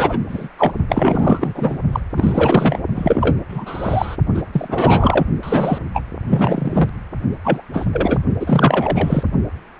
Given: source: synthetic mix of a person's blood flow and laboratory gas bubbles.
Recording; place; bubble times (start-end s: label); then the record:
Doppler ultrasound of blood flow; precordium
0.00-0.18 s: bubbles
0.28-0.48 s: bubbles
0.58-0.72 s: bubbles
0.89-1.79 s: bubbles
1.92-2.00 s: bubbles
2.17-2.79 s: bubbles
2.94-3.36 s: bubbles
3.48-4.17 s: bubbles
4.34-4.42 s: bubbles
4.52-5.25 s: bubbles
5.43-5.79 s: bubbles
5.93-6.03 s: bubbles
6.27-6.89 s: bubbles
7.44-7.62 s: bubbles
7.73-7.86 s: bubbles
7.92-8.19 s: bubbles
8.40-9.23 s: bubbles
From the record:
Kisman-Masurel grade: 333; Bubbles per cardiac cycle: rolling drumbeat, 9 or more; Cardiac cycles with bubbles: 50 to 99%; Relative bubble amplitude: loud (0.450 to 0.775); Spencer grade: 3 (all of the cardiac periods contain showers or single bubble signals, but not dominating or overriding the cardiac motion signals); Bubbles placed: only in the low amplitude regions of the cardiac cycle